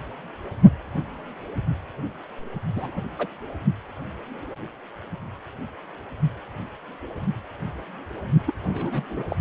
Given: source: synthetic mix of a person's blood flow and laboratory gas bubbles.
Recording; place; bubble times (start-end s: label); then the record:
Doppler ultrasound of blood flow; precordium
2.76-3.02 s: bubbles
3.18-3.27 s: bubbles
8.46-8.52 s: bubbles
8.68-9.03 s: bubbles
9.10-9.23 s: bubbles
9.29-9.36 s: bubbles
From the record:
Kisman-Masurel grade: 221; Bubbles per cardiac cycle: several, 3 to 8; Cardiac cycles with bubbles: 10 to 50%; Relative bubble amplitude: barely perceptible (0.100 to 0.250); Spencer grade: 2 (many but less than half of the cardiac periods contain bubble signals, singularly or in groups); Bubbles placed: only in the low amplitude regions of the cardiac cycle